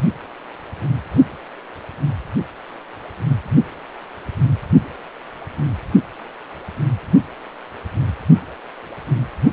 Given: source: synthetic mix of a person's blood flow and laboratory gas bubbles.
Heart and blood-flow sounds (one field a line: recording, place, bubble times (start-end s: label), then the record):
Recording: Doppler ultrasound of blood flow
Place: precordium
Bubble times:
no bubbles
From the record:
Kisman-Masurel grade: 000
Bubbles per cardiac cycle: 0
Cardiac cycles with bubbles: 0%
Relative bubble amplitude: no bubbles discernible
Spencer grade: 0 (complete lack of bubble signals)